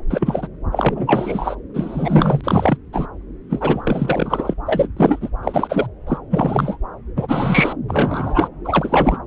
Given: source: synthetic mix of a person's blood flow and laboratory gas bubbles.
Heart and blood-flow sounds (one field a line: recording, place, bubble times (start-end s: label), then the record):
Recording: Doppler ultrasound of blood flow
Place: subclavian vein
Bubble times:
0.10-0.48 s: bubbles
0.71-1.55 s: bubbles
1.73-2.41 s: bubbles
2.44-2.77 s: bubbles
2.92-3.06 s: bubbles
3.50-4.55 s: bubbles
4.66-4.88 s: bubbles
4.96-5.29 s: bubbles
5.43-5.87 s: bubbles
6.07-6.18 s: bubbles
6.30-6.78 s: bubbles
7.17-7.76 s: bubbles
7.87-8.49 s: bubbles
8.64-9.18 s: bubbles
From the record:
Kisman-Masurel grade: 343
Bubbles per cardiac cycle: rolling drumbeat, 9 or more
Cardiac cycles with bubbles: 100%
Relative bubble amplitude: loud (0.450 to 0.775)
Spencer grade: 3 (all of the cardiac periods contain showers or single bubble signals, but not dominating or overriding the cardiac motion signals)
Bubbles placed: anywhere in the cardiac cycle